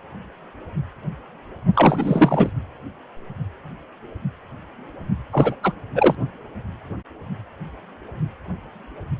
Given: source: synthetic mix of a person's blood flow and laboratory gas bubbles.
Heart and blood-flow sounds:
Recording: Doppler ultrasound of blood flow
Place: precordium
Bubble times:
1.74-2.50 s: bubbles
5.32-5.55 s: bubbles
5.63-5.72 s: bubbles
5.95-6.15 s: bubbles
From the record:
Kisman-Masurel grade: 223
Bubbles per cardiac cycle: several, 3 to 8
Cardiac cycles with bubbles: 10 to 50%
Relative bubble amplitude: loud (0.450 to 0.775)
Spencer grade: 2 (many but less than half of the cardiac periods contain bubble signals, singularly or in groups)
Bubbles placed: only in the low amplitude regions of the cardiac cycle

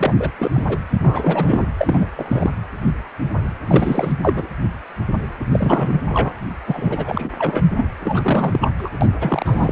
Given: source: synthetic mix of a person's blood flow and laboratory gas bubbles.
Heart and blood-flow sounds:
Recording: Doppler ultrasound of blood flow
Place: precordium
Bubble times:
0.00-0.12 s: bubbles
0.19-0.30 s: bubbles
0.38-0.51 s: bubbles
0.54-0.64 s: bubbles
0.68-0.77 s: bubbles
0.91-1.71 s: bubbles
1.78-2.07 s: bubbles
2.17-2.50 s: bubbles
3.67-4.12 s: bubbles
4.22-4.47 s: bubbles
5.51-5.96 s: bubbles
6.07-6.32 s: bubbles
6.66-7.30 s: bubbles
7.38-7.64 s: bubbles
7.76-7.85 s: bubbles
8.00-8.72 s: bubbles
8.78-8.90 s: bubbles
9.01-9.08 s: bubbles
9.20-9.72 s: bubbles
From the record:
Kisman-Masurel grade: 333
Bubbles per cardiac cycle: rolling drumbeat, 9 or more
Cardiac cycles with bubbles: 50 to 99%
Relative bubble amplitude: loud (0.450 to 0.775)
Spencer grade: 3 (all of the cardiac periods contain showers or single bubble signals, but not dominating or overriding the cardiac motion signals)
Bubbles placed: anywhere in the cardiac cycle

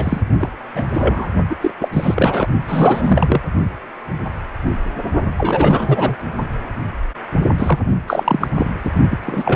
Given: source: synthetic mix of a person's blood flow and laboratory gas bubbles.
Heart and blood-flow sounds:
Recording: Doppler ultrasound of blood flow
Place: precordium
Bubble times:
0.00-0.21 s: bubbles
0.40-0.49 s: bubbles
0.73-0.84 s: bubbles
0.93-1.28 s: bubbles
1.50-1.56 s: bubbles
1.61-1.71 s: bubbles
1.80-1.89 s: bubbles
1.92-2.46 s: bubbles
2.65-3.41 s: bubbles
5.37-6.16 s: bubbles
7.58-7.79 s: bubbles
8.07-8.47 s: bubbles
8.58-8.73 s: bubbles
8.84-8.91 s: bubbles
9.10-9.19 s: bubbles
9.26-9.56 s: bubbles
From the record:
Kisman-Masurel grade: 333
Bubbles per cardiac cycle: rolling drumbeat, 9 or more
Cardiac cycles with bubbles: 50 to 99%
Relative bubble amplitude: loud (0.450 to 0.775)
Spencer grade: 3 (all of the cardiac periods contain showers or single bubble signals, but not dominating or overriding the cardiac motion signals)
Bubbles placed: only in the low amplitude regions of the cardiac cycle

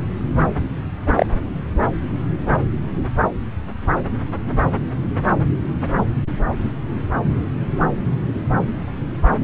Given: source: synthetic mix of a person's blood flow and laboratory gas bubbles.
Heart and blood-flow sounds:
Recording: Doppler ultrasound of blood flow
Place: subclavian vein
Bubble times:
1.17-1.26 s: bubbles
From the record:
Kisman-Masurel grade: 113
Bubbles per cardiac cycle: 1 to 2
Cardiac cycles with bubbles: 1 to 10%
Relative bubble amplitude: loud (0.450 to 0.775)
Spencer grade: 1 (occasional bubble signal discernible with the cardiac motion signal, with majority of cardiac periods free of bubbles)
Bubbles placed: anywhere in the cardiac cycle

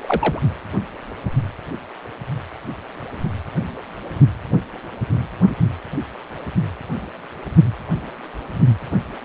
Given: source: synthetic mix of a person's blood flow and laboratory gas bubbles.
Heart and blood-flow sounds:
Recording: Doppler ultrasound of blood flow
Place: precordium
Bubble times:
0.01-0.40 s: bubbles
From the record:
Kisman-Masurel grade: 212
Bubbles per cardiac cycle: several, 3 to 8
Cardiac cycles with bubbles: 1 to 10%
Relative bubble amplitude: moderate (0.250 to 0.450)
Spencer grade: 1 (occasional bubble signal discernible with the cardiac motion signal, with majority of cardiac periods free of bubbles)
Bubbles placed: only in the low amplitude regions of the cardiac cycle

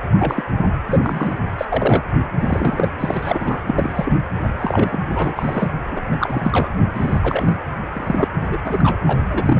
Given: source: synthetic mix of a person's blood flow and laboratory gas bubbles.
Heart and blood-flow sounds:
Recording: Doppler ultrasound of blood flow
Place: precordium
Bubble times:
0.19-0.44 s: bubbles
0.88-1.38 s: bubbles
1.58-1.65 s: bubbles
1.69-2.03 s: bubbles
2.38-2.88 s: bubbles
3.00-3.61 s: bubbles
3.67-4.13 s: bubbles
4.43-4.49 s: bubbles
4.58-4.99 s: bubbles
5.09-5.68 s: bubbles
5.91-6.16 s: bubbles
6.20-6.71 s: bubbles
6.94-7.55 s: bubbles
7.93-8.28 s: bubbles
8.41-8.58 s: bubbles
8.64-8.98 s: bubbles
9.06-9.22 s: bubbles
9.29-9.59 s: bubbles
From the record:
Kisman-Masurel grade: 242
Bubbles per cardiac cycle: several, 3 to 8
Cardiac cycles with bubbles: 100%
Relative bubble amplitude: moderate (0.250 to 0.450)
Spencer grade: 3 (all of the cardiac periods contain showers or single bubble signals, but not dominating or overriding the cardiac motion signals)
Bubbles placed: anywhere in the cardiac cycle

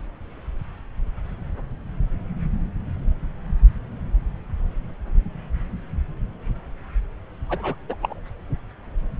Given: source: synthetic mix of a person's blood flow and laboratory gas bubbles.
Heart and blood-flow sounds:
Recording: Doppler ultrasound of blood flow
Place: subclavian vein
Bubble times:
7.49-7.75 s: bubbles
7.89-7.95 s: bubbles
8.01-8.20 s: bubbles
From the record:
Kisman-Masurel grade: 212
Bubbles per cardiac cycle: several, 3 to 8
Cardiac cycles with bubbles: 1 to 10%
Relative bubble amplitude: moderate (0.250 to 0.450)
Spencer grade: 1 (occasional bubble signal discernible with the cardiac motion signal, with majority of cardiac periods free of bubbles)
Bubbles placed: anywhere in the cardiac cycle

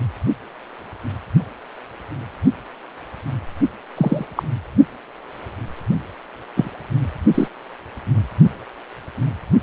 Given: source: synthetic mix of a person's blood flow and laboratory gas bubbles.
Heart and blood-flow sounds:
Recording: Doppler ultrasound of blood flow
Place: precordium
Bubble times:
3.97-4.26 s: bubbles
4.36-4.43 s: bubbles
6.56-6.71 s: bubbles
7.34-7.48 s: bubbles
From the record:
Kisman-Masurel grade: 123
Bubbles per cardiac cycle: 1 to 2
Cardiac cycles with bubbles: 10 to 50%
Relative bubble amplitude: loud (0.450 to 0.775)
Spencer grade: 2 (many but less than half of the cardiac periods contain bubble signals, singularly or in groups)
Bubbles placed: only in the low amplitude regions of the cardiac cycle

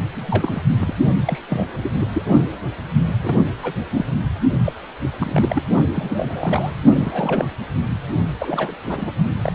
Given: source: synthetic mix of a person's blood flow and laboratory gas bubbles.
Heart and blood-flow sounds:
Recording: Doppler ultrasound of blood flow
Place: precordium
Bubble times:
0.15-0.60 s: bubbles
0.79-0.93 s: bubbles
1.25-1.41 s: bubbles
1.49-1.66 s: bubbles
1.81-1.92 s: bubbles
1.98-2.08 s: bubbles
2.12-2.23 s: bubbles
3.22-3.43 s: bubbles
3.62-3.74 s: bubbles
3.92-4.05 s: bubbles
4.64-4.72 s: bubbles
5.19-5.62 s: bubbles
5.95-6.74 s: bubbles
6.92-7.48 s: bubbles
8.39-8.75 s: bubbles
8.83-9.13 s: bubbles
9.32-9.55 s: bubbles
From the record:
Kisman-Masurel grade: 242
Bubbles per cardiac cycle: several, 3 to 8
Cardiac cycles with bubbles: 100%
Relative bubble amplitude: moderate (0.250 to 0.450)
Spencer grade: 3 (all of the cardiac periods contain showers or single bubble signals, but not dominating or overriding the cardiac motion signals)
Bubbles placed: only in the low amplitude regions of the cardiac cycle

